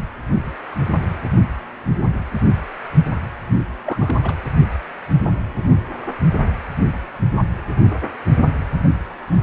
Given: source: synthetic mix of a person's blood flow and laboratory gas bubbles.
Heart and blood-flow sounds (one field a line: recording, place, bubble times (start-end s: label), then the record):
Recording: Doppler ultrasound of blood flow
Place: precordium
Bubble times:
3.85-4.35 s: bubbles
From the record:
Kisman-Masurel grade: 211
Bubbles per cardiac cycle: several, 3 to 8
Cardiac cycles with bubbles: 1 to 10%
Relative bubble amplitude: barely perceptible (0.100 to 0.250)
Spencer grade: 1 (occasional bubble signal discernible with the cardiac motion signal, with majority of cardiac periods free of bubbles)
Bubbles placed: anywhere in the cardiac cycle